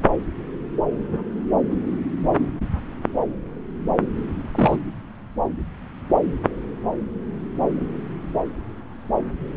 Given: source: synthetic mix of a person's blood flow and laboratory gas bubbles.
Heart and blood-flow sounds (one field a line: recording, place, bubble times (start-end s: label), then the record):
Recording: Doppler ultrasound of blood flow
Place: subclavian vein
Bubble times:
4.54-4.77 s: bubbles
From the record:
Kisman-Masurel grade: 112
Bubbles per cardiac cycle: 1 to 2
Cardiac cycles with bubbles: 1 to 10%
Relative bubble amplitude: moderate (0.250 to 0.450)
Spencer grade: 1 (occasional bubble signal discernible with the cardiac motion signal, with majority of cardiac periods free of bubbles)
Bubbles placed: anywhere in the cardiac cycle